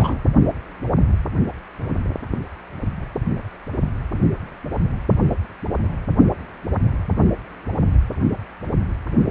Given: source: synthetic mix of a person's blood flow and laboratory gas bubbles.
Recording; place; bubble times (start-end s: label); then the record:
Doppler ultrasound of blood flow; precordium
0.00-0.17 s: bubbles
From the record:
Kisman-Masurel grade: 212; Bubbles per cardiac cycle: several, 3 to 8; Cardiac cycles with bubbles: 1 to 10%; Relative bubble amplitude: moderate (0.250 to 0.450); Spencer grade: 1 (occasional bubble signal discernible with the cardiac motion signal, with majority of cardiac periods free of bubbles); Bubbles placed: anywhere in the cardiac cycle